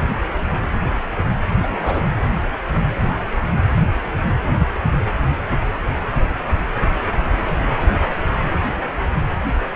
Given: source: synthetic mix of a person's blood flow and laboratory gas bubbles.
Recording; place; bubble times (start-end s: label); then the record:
Doppler ultrasound of blood flow; precordium
1.62-2.15 s: bubbles
From the record:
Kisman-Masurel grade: 211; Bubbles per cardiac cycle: several, 3 to 8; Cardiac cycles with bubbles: 1 to 10%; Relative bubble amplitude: barely perceptible (0.100 to 0.250); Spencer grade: 1 (occasional bubble signal discernible with the cardiac motion signal, with majority of cardiac periods free of bubbles); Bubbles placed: anywhere in the cardiac cycle